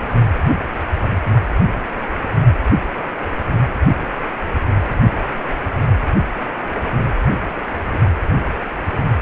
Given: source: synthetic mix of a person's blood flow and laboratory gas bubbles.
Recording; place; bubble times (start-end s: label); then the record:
Doppler ultrasound of blood flow; precordium
7.92-7.99 s: bubbles
From the record:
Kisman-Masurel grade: 112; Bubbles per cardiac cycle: 1 to 2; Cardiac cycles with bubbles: 1 to 10%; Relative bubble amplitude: moderate (0.250 to 0.450); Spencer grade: 1 (occasional bubble signal discernible with the cardiac motion signal, with majority of cardiac periods free of bubbles); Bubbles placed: anywhere in the cardiac cycle